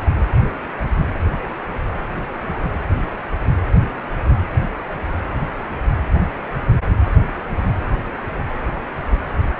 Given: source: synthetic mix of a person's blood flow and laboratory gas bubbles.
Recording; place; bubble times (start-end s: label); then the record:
Doppler ultrasound of blood flow; precordium
no bubbles
From the record:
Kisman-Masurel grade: 000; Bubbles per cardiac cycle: 0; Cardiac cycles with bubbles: 0%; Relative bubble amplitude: no bubbles discernible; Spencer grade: 0 (complete lack of bubble signals)